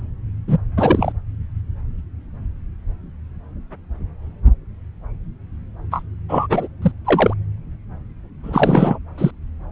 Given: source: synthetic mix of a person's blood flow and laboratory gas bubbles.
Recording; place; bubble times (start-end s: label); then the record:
Doppler ultrasound of blood flow; subclavian vein
0.47-0.57 s: bubbles
0.77-1.12 s: bubbles
5.91-6.03 s: bubbles
6.29-6.67 s: bubbles
6.82-6.92 s: bubbles
7.04-7.33 s: bubbles
8.43-8.98 s: bubbles
9.18-9.31 s: bubbles
From the record:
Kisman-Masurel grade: 223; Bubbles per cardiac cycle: several, 3 to 8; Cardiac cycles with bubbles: 10 to 50%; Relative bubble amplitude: loud (0.450 to 0.775); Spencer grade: 2 (many but less than half of the cardiac periods contain bubble signals, singularly or in groups); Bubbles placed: anywhere in the cardiac cycle